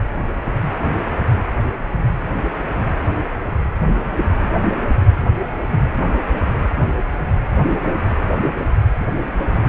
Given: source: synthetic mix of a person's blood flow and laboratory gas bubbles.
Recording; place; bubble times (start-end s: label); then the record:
Doppler ultrasound of blood flow; precordium
no bubbles
From the record:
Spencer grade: 0 (complete lack of bubble signals)